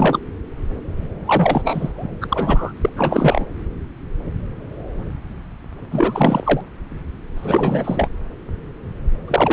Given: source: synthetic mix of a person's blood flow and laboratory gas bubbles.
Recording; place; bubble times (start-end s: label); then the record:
Doppler ultrasound of blood flow; subclavian vein
0.00-0.19 s: bubbles
1.25-1.93 s: bubbles
1.98-2.07 s: bubbles
2.21-2.73 s: bubbles
2.81-2.90 s: bubbles
2.96-3.45 s: bubbles
5.91-6.61 s: bubbles
7.36-8.08 s: bubbles
9.28-9.52 s: bubbles
From the record:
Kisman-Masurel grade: 332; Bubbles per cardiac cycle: rolling drumbeat, 9 or more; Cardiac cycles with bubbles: 50 to 99%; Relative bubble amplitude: moderate (0.250 to 0.450); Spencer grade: 3 (all of the cardiac periods contain showers or single bubble signals, but not dominating or overriding the cardiac motion signals); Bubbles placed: anywhere in the cardiac cycle